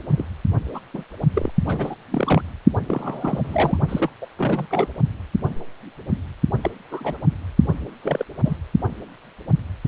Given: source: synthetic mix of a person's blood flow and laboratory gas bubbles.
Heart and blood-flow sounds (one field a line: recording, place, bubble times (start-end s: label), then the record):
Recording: Doppler ultrasound of blood flow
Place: precordium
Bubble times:
0.11-0.24 s: bubbles
0.72-0.80 s: bubbles
0.94-1.03 s: bubbles
1.33-1.52 s: bubbles
1.65-1.95 s: bubbles
2.12-2.42 s: bubbles
2.87-3.77 s: bubbles
3.88-4.10 s: bubbles
4.22-4.26 s: bubbles
4.37-4.67 s: bubbles
4.70-4.89 s: bubbles
6.62-6.71 s: bubbles
6.91-7.19 s: bubbles
8.02-8.24 s: bubbles
8.44-8.58 s: bubbles
From the record:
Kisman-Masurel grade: 232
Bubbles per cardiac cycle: several, 3 to 8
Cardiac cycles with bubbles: 50 to 99%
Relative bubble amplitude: moderate (0.250 to 0.450)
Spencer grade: 3 (all of the cardiac periods contain showers or single bubble signals, but not dominating or overriding the cardiac motion signals)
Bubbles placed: only in the low amplitude regions of the cardiac cycle